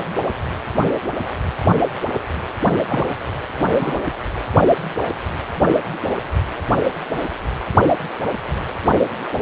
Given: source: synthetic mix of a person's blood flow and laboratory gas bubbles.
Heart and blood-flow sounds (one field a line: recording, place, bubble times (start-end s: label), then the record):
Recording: Doppler ultrasound of blood flow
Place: precordium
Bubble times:
2.89-3.03 s: bubbles
3.73-4.00 s: bubbles
From the record:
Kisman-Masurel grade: 112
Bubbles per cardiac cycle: 1 to 2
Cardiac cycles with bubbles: 1 to 10%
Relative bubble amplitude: moderate (0.250 to 0.450)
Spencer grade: 1 (occasional bubble signal discernible with the cardiac motion signal, with majority of cardiac periods free of bubbles)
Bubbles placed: only in the low amplitude regions of the cardiac cycle